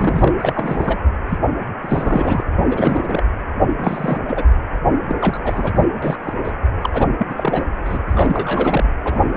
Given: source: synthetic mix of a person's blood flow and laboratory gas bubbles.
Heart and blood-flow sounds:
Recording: Doppler ultrasound of blood flow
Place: precordium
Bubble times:
0.00-0.33 s: bubbles
0.40-1.01 s: bubbles
1.28-1.38 s: bubbles
1.82-2.44 s: bubbles
2.67-3.21 s: bubbles
3.78-4.18 s: bubbles
4.28-4.45 s: bubbles
5.08-5.15 s: bubbles
5.19-5.73 s: bubbles
5.76-5.86 s: bubbles
6.02-6.18 s: bubbles
6.24-6.33 s: bubbles
6.45-6.52 s: bubbles
6.81-6.90 s: bubbles
6.93-7.07 s: bubbles
7.18-7.27 s: bubbles
7.29-7.67 s: bubbles
7.84-7.99 s: bubbles
8.07-8.88 s: bubbles
9.04-9.37 s: bubbles
From the record:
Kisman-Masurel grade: 342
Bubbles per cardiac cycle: rolling drumbeat, 9 or more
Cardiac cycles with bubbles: 100%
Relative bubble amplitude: moderate (0.250 to 0.450)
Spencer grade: 3 (all of the cardiac periods contain showers or single bubble signals, but not dominating or overriding the cardiac motion signals)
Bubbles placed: anywhere in the cardiac cycle

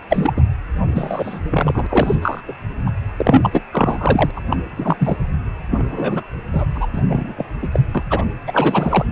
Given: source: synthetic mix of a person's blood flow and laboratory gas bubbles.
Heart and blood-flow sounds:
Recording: Doppler ultrasound of blood flow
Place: precordium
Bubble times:
0.09-0.33 s: bubbles
0.36-0.42 s: bubbles
0.85-1.40 s: bubbles
1.50-1.87 s: bubbles
1.89-2.16 s: bubbles
2.22-2.41 s: bubbles
2.48-2.54 s: bubbles
2.85-2.92 s: bubbles
3.18-3.50 s: bubbles
3.52-3.62 s: bubbles
3.72-4.31 s: bubbles
4.36-4.40 s: bubbles
4.49-5.17 s: bubbles
5.71-6.23 s: bubbles
6.52-6.65 s: bubbles
6.74-6.86 s: bubbles
6.93-7.01 s: bubbles
7.07-7.34 s: bubbles
7.38-7.46 s: bubbles
7.62-7.67 s: bubbles
7.71-7.79 s: bubbles
7.95-8.03 s: bubbles
8.10-8.23 s: bubbles
8.47-9.05 s: bubbles
From the record:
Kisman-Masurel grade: 243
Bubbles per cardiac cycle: several, 3 to 8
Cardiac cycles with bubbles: 100%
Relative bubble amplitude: loud (0.450 to 0.775)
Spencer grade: 3 (all of the cardiac periods contain showers or single bubble signals, but not dominating or overriding the cardiac motion signals)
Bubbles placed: anywhere in the cardiac cycle

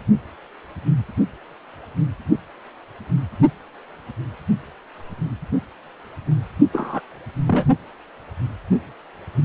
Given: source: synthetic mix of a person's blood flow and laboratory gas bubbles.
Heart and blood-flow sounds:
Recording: Doppler ultrasound of blood flow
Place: precordium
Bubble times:
6.73-7.00 s: bubbles
7.47-7.65 s: bubbles
From the record:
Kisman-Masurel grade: 112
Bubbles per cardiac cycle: 1 to 2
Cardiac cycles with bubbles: 1 to 10%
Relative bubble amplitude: moderate (0.250 to 0.450)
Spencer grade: 1 (occasional bubble signal discernible with the cardiac motion signal, with majority of cardiac periods free of bubbles)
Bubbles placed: only in the low amplitude regions of the cardiac cycle

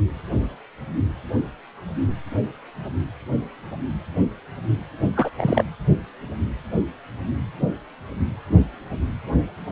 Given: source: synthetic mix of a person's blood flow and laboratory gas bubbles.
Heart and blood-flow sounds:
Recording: Doppler ultrasound of blood flow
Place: precordium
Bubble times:
5.15-5.30 s: bubbles
5.38-5.64 s: bubbles
From the record:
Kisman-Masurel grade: 212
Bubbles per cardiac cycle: several, 3 to 8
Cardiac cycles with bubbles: 1 to 10%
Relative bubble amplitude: moderate (0.250 to 0.450)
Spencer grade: 1 (occasional bubble signal discernible with the cardiac motion signal, with majority of cardiac periods free of bubbles)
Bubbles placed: only in the low amplitude regions of the cardiac cycle

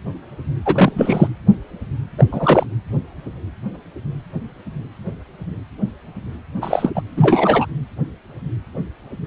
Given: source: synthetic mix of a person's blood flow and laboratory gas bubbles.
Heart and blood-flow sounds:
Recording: Doppler ultrasound of blood flow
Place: precordium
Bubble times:
0.65-1.27 s: bubbles
2.18-2.27 s: bubbles
2.31-2.67 s: bubbles
6.61-6.91 s: bubbles
6.95-7.02 s: bubbles
7.17-7.66 s: bubbles
From the record:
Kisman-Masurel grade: 223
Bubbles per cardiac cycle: several, 3 to 8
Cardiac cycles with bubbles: 10 to 50%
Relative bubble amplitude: loud (0.450 to 0.775)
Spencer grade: 2 (many but less than half of the cardiac periods contain bubble signals, singularly or in groups)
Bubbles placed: anywhere in the cardiac cycle

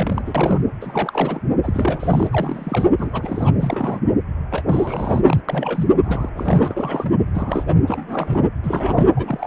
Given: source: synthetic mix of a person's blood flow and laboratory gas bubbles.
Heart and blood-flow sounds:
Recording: Doppler ultrasound of blood flow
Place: precordium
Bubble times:
0.00-0.61 s: bubbles
0.81-1.42 s: bubbles
1.63-2.88 s: bubbles
2.99-3.54 s: bubbles
3.59-4.03 s: bubbles
4.50-4.62 s: bubbles
4.67-5.41 s: bubbles
5.49-5.87 s: bubbles
6.04-6.29 s: bubbles
6.37-6.74 s: bubbles
6.77-7.13 s: bubbles
7.33-7.74 s: bubbles
7.87-8.40 s: bubbles
8.62-9.11 s: bubbles
9.16-9.47 s: bubbles
From the record:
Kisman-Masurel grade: 332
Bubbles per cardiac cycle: rolling drumbeat, 9 or more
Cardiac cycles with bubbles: 50 to 99%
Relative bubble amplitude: moderate (0.250 to 0.450)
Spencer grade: 3 (all of the cardiac periods contain showers or single bubble signals, but not dominating or overriding the cardiac motion signals)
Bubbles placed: anywhere in the cardiac cycle

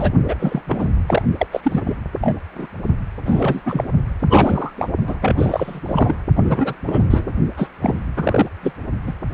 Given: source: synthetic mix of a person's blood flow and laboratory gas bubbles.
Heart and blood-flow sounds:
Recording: Doppler ultrasound of blood flow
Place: precordium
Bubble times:
0.00-0.12 s: bubbles
0.28-0.35 s: bubbles
0.40-0.61 s: bubbles
0.67-0.86 s: bubbles
1.07-1.22 s: bubbles
1.38-1.47 s: bubbles
1.51-1.60 s: bubbles
1.63-1.82 s: bubbles
1.86-1.95 s: bubbles
2.21-2.34 s: bubbles
2.54-2.67 s: bubbles
3.25-3.61 s: bubbles
3.66-3.84 s: bubbles
4.21-4.73 s: bubbles
4.77-4.89 s: bubbles
5.07-5.17 s: bubbles
5.21-5.81 s: bubbles
5.87-6.15 s: bubbles
6.36-6.42 s: bubbles
6.45-6.75 s: bubbles
6.86-7.33 s: bubbles
7.57-7.69 s: bubbles
7.80-8.05 s: bubbles
8.16-8.46 s: bubbles
8.62-8.72 s: bubbles
9.06-9.15 s: bubbles
From the record:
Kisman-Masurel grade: 343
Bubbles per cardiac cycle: rolling drumbeat, 9 or more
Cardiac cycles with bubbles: 100%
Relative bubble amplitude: loud (0.450 to 0.775)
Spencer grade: 3 (all of the cardiac periods contain showers or single bubble signals, but not dominating or overriding the cardiac motion signals)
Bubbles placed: only in the low amplitude regions of the cardiac cycle

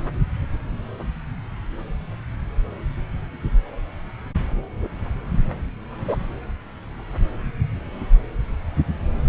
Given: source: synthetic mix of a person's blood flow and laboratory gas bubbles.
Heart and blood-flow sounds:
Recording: Doppler ultrasound of blood flow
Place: subclavian vein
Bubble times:
6.08-6.17 s: bubbles
From the record:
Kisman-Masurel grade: 123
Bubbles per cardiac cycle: 1 to 2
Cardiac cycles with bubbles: 10 to 50%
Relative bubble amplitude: loud (0.450 to 0.775)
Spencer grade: 2 (many but less than half of the cardiac periods contain bubble signals, singularly or in groups)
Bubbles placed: anywhere in the cardiac cycle

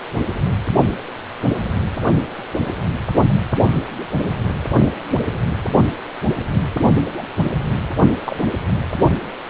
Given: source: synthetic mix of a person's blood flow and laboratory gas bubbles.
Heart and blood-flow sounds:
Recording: Doppler ultrasound of blood flow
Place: precordium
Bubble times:
3.60-3.67 s: bubbles
7.17-7.22 s: bubbles
8.24-8.37 s: bubbles
From the record:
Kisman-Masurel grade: 122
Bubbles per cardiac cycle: 1 to 2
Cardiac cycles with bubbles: 10 to 50%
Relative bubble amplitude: moderate (0.250 to 0.450)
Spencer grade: 2 (many but less than half of the cardiac periods contain bubble signals, singularly or in groups)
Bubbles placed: only in the low amplitude regions of the cardiac cycle

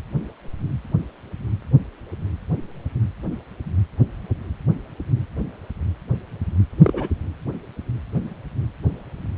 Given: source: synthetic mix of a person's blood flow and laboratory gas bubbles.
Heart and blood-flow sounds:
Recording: Doppler ultrasound of blood flow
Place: precordium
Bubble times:
6.83-7.08 s: bubbles
From the record:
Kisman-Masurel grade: 122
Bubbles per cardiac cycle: 1 to 2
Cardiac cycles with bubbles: 10 to 50%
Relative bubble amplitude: moderate (0.250 to 0.450)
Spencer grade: 2 (many but less than half of the cardiac periods contain bubble signals, singularly or in groups)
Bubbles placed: anywhere in the cardiac cycle

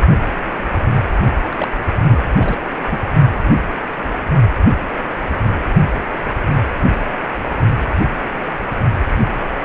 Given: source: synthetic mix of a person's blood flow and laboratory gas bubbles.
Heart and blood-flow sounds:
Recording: Doppler ultrasound of blood flow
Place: precordium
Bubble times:
1.52-1.71 s: bubbles
2.08-2.25 s: bubbles
2.35-2.58 s: bubbles
2.89-3.00 s: bubbles
From the record:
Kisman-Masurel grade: 221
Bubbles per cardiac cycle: several, 3 to 8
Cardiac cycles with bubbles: 10 to 50%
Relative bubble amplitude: barely perceptible (0.100 to 0.250)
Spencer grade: 2 (many but less than half of the cardiac periods contain bubble signals, singularly or in groups)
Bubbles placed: only in the low amplitude regions of the cardiac cycle

